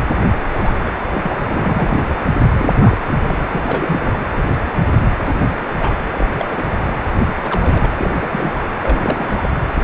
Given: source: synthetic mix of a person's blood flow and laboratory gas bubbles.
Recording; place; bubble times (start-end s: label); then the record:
Doppler ultrasound of blood flow; precordium
0.49-0.76 s: bubbles
0.85-0.92 s: bubbles
1.00-1.06 s: bubbles
1.13-1.40 s: bubbles
1.46-2.04 s: bubbles
2.06-2.16 s: bubbles
2.54-2.73 s: bubbles
2.79-2.98 s: bubbles
3.08-3.15 s: bubbles
3.24-3.46 s: bubbles
3.48-4.12 s: bubbles
4.36-4.43 s: bubbles
4.65-4.70 s: bubbles
4.86-4.91 s: bubbles
5.25-5.67 s: bubbles
5.74-5.97 s: bubbles
6.17-6.27 s: bubbles
6.38-6.46 s: bubbles
6.50-6.65 s: bubbles
7.42-7.93 s: bubbles
8.00-8.11 s: bubbles
8.14-8.62 s: bubbles
8.82-9.49 s: bubbles
9.82-9.84 s: bubbles
From the record:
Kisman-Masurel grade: 242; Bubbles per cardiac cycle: several, 3 to 8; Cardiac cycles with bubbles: 100%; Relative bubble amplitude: moderate (0.250 to 0.450); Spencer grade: 3 (all of the cardiac periods contain showers or single bubble signals, but not dominating or overriding the cardiac motion signals); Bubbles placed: anywhere in the cardiac cycle